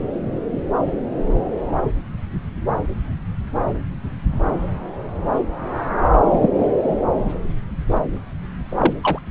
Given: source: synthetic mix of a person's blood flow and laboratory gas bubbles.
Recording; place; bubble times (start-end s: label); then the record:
Doppler ultrasound of blood flow; subclavian vein
6.31-6.48 s: bubbles
8.69-8.94 s: bubbles
9.01-9.19 s: bubbles
From the record:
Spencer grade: 2 (many but less than half of the cardiac periods contain bubble signals, singularly or in groups); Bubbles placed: anywhere in the cardiac cycle